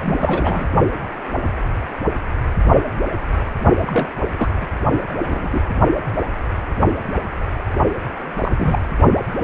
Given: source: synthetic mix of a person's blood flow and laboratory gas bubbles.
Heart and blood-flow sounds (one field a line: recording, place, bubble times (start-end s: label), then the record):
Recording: Doppler ultrasound of blood flow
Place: precordium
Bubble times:
0.05-0.67 s: bubbles
3.86-4.08 s: bubbles
4.36-4.50 s: bubbles
4.61-4.67 s: bubbles
5.28-5.49 s: bubbles
5.52-5.62 s: bubbles
8.42-8.51 s: bubbles
8.56-8.82 s: bubbles
From the record:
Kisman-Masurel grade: 222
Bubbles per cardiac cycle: several, 3 to 8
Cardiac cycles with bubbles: 10 to 50%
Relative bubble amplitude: moderate (0.250 to 0.450)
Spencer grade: 2 (many but less than half of the cardiac periods contain bubble signals, singularly or in groups)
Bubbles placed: only in the low amplitude regions of the cardiac cycle